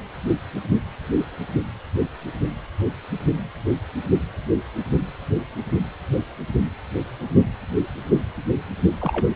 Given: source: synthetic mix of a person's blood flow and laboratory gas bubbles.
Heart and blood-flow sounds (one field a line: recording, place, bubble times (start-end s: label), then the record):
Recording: Doppler ultrasound of blood flow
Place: precordium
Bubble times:
9.00-9.27 s: bubbles
From the record:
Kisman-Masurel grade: 211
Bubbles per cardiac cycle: several, 3 to 8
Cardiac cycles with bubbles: 1 to 10%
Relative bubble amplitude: barely perceptible (0.100 to 0.250)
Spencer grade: 1 (occasional bubble signal discernible with the cardiac motion signal, with majority of cardiac periods free of bubbles)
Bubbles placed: only in the low amplitude regions of the cardiac cycle